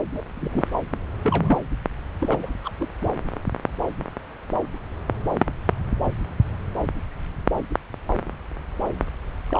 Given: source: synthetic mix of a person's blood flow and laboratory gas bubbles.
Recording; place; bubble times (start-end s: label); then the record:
Doppler ultrasound of blood flow; subclavian vein
0.14-0.22 s: bubbles
0.36-0.67 s: bubbles
1.23-1.58 s: bubbles
2.21-2.50 s: bubbles
2.64-2.72 s: bubbles
2.79-2.87 s: bubbles
3.02-3.07 s: bubbles
9.47-9.60 s: bubbles
From the record:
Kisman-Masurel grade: 221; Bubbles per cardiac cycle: several, 3 to 8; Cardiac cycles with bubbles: 10 to 50%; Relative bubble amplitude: barely perceptible (0.100 to 0.250); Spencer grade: 2 (many but less than half of the cardiac periods contain bubble signals, singularly or in groups); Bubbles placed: anywhere in the cardiac cycle